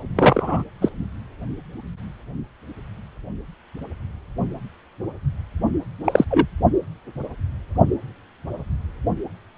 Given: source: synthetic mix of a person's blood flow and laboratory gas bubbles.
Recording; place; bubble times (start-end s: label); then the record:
Doppler ultrasound of blood flow; precordium
0.15-0.64 s: bubbles
0.81-0.89 s: bubbles
6.04-6.25 s: bubbles
6.30-6.46 s: bubbles
From the record:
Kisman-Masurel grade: 223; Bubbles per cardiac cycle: several, 3 to 8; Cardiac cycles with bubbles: 10 to 50%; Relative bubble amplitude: loud (0.450 to 0.775); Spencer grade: 2 (many but less than half of the cardiac periods contain bubble signals, singularly or in groups); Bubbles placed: only in the low amplitude regions of the cardiac cycle